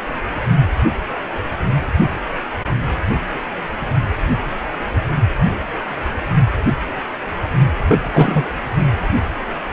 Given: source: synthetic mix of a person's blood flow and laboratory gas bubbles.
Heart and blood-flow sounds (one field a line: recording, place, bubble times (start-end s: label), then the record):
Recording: Doppler ultrasound of blood flow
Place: precordium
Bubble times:
7.89-8.00 s: bubbles
8.12-8.45 s: bubbles
From the record:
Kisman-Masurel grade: 213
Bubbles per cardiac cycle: several, 3 to 8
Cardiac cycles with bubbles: 1 to 10%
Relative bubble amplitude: loud (0.450 to 0.775)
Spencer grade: 1 (occasional bubble signal discernible with the cardiac motion signal, with majority of cardiac periods free of bubbles)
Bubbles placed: only in the low amplitude regions of the cardiac cycle